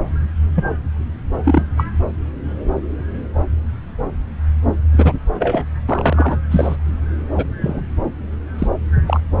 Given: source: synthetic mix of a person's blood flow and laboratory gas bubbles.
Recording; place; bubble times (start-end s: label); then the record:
Doppler ultrasound of blood flow; subclavian vein
0.54-0.66 s: bubbles
1.44-1.63 s: bubbles
1.77-1.85 s: bubbles
4.92-5.13 s: bubbles
5.39-5.65 s: bubbles
5.88-6.38 s: bubbles
6.50-6.76 s: bubbles
7.35-7.46 s: bubbles
7.60-7.81 s: bubbles
8.58-8.67 s: bubbles
9.06-9.21 s: bubbles
From the record:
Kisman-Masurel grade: 233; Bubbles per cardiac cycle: several, 3 to 8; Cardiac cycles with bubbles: 50 to 99%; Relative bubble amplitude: loud (0.450 to 0.775); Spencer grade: 3 (all of the cardiac periods contain showers or single bubble signals, but not dominating or overriding the cardiac motion signals); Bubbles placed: anywhere in the cardiac cycle